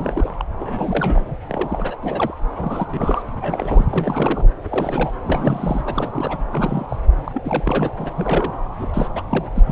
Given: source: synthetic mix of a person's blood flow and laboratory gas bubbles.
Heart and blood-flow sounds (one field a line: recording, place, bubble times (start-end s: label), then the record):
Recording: Doppler ultrasound of blood flow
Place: subclavian vein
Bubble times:
0.00-0.29 s: bubbles
0.37-0.45 s: bubbles
0.59-1.35 s: bubbles
1.49-1.97 s: bubbles
2.02-2.34 s: bubbles
2.57-3.22 s: bubbles
3.29-4.50 s: bubbles
4.62-5.11 s: bubbles
5.24-6.38 s: bubbles
6.52-6.86 s: bubbles
6.88-6.96 s: bubbles
7.24-7.41 s: bubbles
7.44-7.91 s: bubbles
7.98-8.10 s: bubbles
8.15-8.54 s: bubbles
8.79-8.89 s: bubbles
8.94-9.08 s: bubbles
9.15-9.23 s: bubbles
9.28-9.51 s: bubbles
9.55-9.61 s: bubbles
9.66-9.72 s: bubbles
From the record:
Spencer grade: 3 (all of the cardiac periods contain showers or single bubble signals, but not dominating or overriding the cardiac motion signals)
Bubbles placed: anywhere in the cardiac cycle